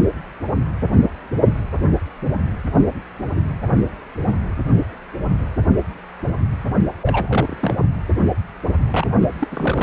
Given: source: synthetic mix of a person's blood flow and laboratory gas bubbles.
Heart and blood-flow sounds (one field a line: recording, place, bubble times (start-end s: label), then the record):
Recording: Doppler ultrasound of blood flow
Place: precordium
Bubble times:
7.02-7.57 s: bubbles
7.60-7.74 s: bubbles
8.90-9.07 s: bubbles
9.21-9.29 s: bubbles
9.39-9.48 s: bubbles
9.51-9.83 s: bubbles
From the record:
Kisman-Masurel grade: 222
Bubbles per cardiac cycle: several, 3 to 8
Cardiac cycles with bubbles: 10 to 50%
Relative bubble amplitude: moderate (0.250 to 0.450)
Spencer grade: 2 (many but less than half of the cardiac periods contain bubble signals, singularly or in groups)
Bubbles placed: only in the low amplitude regions of the cardiac cycle